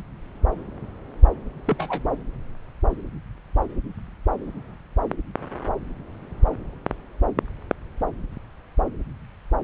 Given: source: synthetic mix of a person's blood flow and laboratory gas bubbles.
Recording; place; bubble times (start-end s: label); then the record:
Doppler ultrasound of blood flow; subclavian vein
1.66-2.04 s: bubbles
From the record:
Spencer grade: 1 (occasional bubble signal discernible with the cardiac motion signal, with majority of cardiac periods free of bubbles); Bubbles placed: anywhere in the cardiac cycle